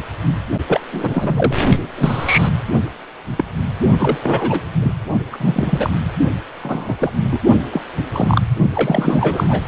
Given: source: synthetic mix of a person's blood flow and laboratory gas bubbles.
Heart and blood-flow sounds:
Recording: Doppler ultrasound of blood flow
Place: precordium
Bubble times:
0.67-0.80 s: bubbles
0.92-1.55 s: bubbles
1.97-2.48 s: bubbles
3.36-3.44 s: bubbles
3.99-4.18 s: bubbles
4.22-4.61 s: bubbles
4.82-4.93 s: bubbles
5.32-5.90 s: bubbles
6.62-6.95 s: bubbles
6.99-7.12 s: bubbles
7.16-7.43 s: bubbles
7.73-7.82 s: bubbles
8.14-8.42 s: bubbles
8.72-9.62 s: bubbles
From the record:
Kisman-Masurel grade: 243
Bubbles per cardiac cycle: several, 3 to 8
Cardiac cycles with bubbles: 100%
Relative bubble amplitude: loud (0.450 to 0.775)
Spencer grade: 3 (all of the cardiac periods contain showers or single bubble signals, but not dominating or overriding the cardiac motion signals)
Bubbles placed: only in the low amplitude regions of the cardiac cycle

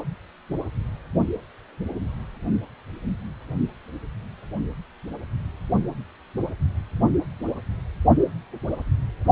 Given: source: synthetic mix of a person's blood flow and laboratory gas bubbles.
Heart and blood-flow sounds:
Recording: Doppler ultrasound of blood flow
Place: precordium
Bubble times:
no bubbles
From the record:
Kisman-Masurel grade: 000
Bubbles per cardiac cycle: 0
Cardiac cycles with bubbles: 0%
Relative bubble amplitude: no bubbles discernible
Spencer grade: 0 (complete lack of bubble signals)

